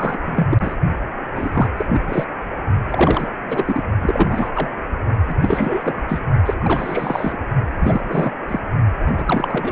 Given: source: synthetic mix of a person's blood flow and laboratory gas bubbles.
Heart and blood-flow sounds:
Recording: Doppler ultrasound of blood flow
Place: precordium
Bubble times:
0.00-0.17 s: bubbles
0.25-0.46 s: bubbles
0.49-0.57 s: bubbles
0.60-0.76 s: bubbles
1.35-1.69 s: bubbles
1.76-1.86 s: bubbles
1.89-2.25 s: bubbles
2.91-3.29 s: bubbles
3.47-3.83 s: bubbles
4.02-4.50 s: bubbles
4.54-4.68 s: bubbles
5.25-5.34 s: bubbles
5.41-6.03 s: bubbles
6.08-6.22 s: bubbles
6.45-6.54 s: bubbles
6.58-7.38 s: bubbles
7.68-8.32 s: bubbles
8.48-8.62 s: bubbles
9.06-9.72 s: bubbles
From the record:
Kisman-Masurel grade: 343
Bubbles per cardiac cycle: rolling drumbeat, 9 or more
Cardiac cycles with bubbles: 100%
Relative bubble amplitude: loud (0.450 to 0.775)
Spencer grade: 3 (all of the cardiac periods contain showers or single bubble signals, but not dominating or overriding the cardiac motion signals)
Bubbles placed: only in the low amplitude regions of the cardiac cycle

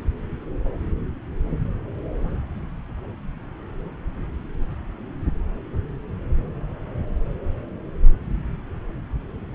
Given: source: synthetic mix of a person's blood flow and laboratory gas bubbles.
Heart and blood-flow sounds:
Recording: Doppler ultrasound of blood flow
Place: subclavian vein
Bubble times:
no bubbles
From the record:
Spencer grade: 0 (complete lack of bubble signals)

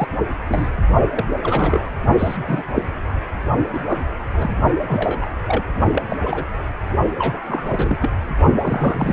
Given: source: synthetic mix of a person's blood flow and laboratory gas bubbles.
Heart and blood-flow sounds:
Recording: Doppler ultrasound of blood flow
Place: precordium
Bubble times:
0.00-0.07 s: bubbles
0.48-0.69 s: bubbles
1.14-1.25 s: bubbles
1.31-1.35 s: bubbles
1.43-1.86 s: bubbles
2.18-2.37 s: bubbles
2.48-2.62 s: bubbles
2.75-2.83 s: bubbles
3.72-3.79 s: bubbles
3.87-4.00 s: bubbles
4.35-4.56 s: bubbles
4.88-5.29 s: bubbles
5.47-5.63 s: bubbles
5.93-6.03 s: bubbles
6.09-6.18 s: bubbles
6.24-6.45 s: bubbles
7.18-7.42 s: bubbles
7.46-8.10 s: bubbles
8.61-9.13 s: bubbles
From the record:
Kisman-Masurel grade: 242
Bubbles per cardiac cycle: several, 3 to 8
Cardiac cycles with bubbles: 100%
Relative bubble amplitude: moderate (0.250 to 0.450)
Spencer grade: 3 (all of the cardiac periods contain showers or single bubble signals, but not dominating or overriding the cardiac motion signals)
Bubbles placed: only in the low amplitude regions of the cardiac cycle

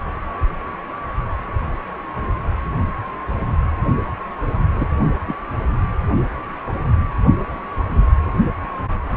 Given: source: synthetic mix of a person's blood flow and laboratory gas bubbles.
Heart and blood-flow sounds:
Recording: Doppler ultrasound of blood flow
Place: precordium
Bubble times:
4.75-4.88 s: bubbles
5.27-5.33 s: bubbles
From the record:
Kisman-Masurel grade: 122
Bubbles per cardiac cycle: 1 to 2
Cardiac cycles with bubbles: 10 to 50%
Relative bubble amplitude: moderate (0.250 to 0.450)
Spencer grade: 2 (many but less than half of the cardiac periods contain bubble signals, singularly or in groups)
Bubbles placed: only in the low amplitude regions of the cardiac cycle

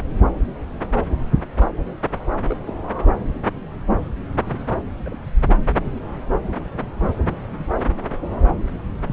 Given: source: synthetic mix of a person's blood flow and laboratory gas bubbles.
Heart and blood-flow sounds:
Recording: Doppler ultrasound of blood flow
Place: subclavian vein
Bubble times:
2.48-2.65 s: bubbles
2.67-2.74 s: bubbles
4.46-4.61 s: bubbles
5.04-5.09 s: bubbles
5.11-5.15 s: bubbles
From the record:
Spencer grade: 2 (many but less than half of the cardiac periods contain bubble signals, singularly or in groups)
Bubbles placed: anywhere in the cardiac cycle

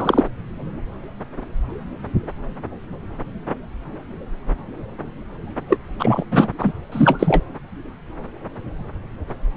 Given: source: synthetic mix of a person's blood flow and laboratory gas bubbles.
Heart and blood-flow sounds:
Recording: Doppler ultrasound of blood flow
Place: subclavian vein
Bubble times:
0.00-0.28 s: bubbles
5.67-5.78 s: bubbles
5.99-6.24 s: bubbles
6.31-6.49 s: bubbles
6.58-6.73 s: bubbles
6.92-7.43 s: bubbles
From the record:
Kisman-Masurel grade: 223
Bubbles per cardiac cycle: several, 3 to 8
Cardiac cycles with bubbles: 10 to 50%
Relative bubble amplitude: loud (0.450 to 0.775)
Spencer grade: 2 (many but less than half of the cardiac periods contain bubble signals, singularly or in groups)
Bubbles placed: anywhere in the cardiac cycle

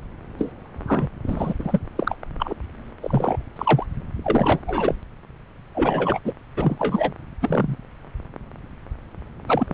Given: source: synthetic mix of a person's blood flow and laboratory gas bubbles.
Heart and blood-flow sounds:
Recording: Doppler ultrasound of blood flow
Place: subclavian vein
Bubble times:
0.38-0.52 s: bubbles
0.87-1.08 s: bubbles
1.26-1.53 s: bubbles
1.59-1.79 s: bubbles
1.96-2.16 s: bubbles
2.39-2.54 s: bubbles
3.01-3.37 s: bubbles
3.56-3.86 s: bubbles
4.23-4.62 s: bubbles
4.66-4.94 s: bubbles
5.75-6.19 s: bubbles
6.24-6.33 s: bubbles
6.56-7.12 s: bubbles
7.42-7.77 s: bubbles
9.46-9.74 s: bubbles
From the record:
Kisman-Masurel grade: 233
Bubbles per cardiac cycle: several, 3 to 8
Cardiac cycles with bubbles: 50 to 99%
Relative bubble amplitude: loud (0.450 to 0.775)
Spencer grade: 3 (all of the cardiac periods contain showers or single bubble signals, but not dominating or overriding the cardiac motion signals)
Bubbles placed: anywhere in the cardiac cycle

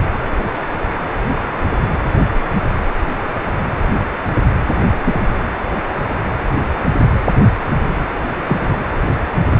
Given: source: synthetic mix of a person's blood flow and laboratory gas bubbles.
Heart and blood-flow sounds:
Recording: Doppler ultrasound of blood flow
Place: precordium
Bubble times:
5.04-5.21 s: bubbles
8.44-8.76 s: bubbles
From the record:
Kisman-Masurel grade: 122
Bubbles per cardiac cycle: 1 to 2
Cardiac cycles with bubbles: 10 to 50%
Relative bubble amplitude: moderate (0.250 to 0.450)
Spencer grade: 2 (many but less than half of the cardiac periods contain bubble signals, singularly or in groups)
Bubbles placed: anywhere in the cardiac cycle

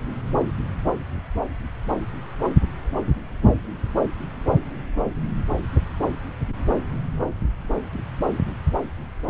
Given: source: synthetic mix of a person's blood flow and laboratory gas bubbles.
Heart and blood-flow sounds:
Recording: Doppler ultrasound of blood flow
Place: subclavian vein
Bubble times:
no bubbles
From the record:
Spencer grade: 0 (complete lack of bubble signals)

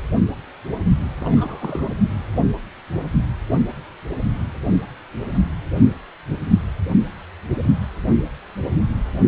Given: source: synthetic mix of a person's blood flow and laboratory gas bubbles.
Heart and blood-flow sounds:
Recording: Doppler ultrasound of blood flow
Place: precordium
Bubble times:
1.18-1.95 s: bubbles
From the record:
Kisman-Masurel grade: 211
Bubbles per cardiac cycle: several, 3 to 8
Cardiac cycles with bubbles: 1 to 10%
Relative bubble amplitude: barely perceptible (0.100 to 0.250)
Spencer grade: 1 (occasional bubble signal discernible with the cardiac motion signal, with majority of cardiac periods free of bubbles)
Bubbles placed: only in the low amplitude regions of the cardiac cycle

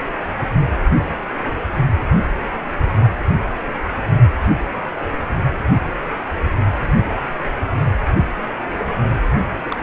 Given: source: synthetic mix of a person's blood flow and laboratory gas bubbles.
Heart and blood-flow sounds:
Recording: Doppler ultrasound of blood flow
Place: precordium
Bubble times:
0.67-0.71 s: bubbles
9.69-9.76 s: bubbles
From the record:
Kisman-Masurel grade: 122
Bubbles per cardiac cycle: 1 to 2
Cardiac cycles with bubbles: 10 to 50%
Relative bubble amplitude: moderate (0.250 to 0.450)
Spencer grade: 2 (many but less than half of the cardiac periods contain bubble signals, singularly or in groups)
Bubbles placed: only in the low amplitude regions of the cardiac cycle

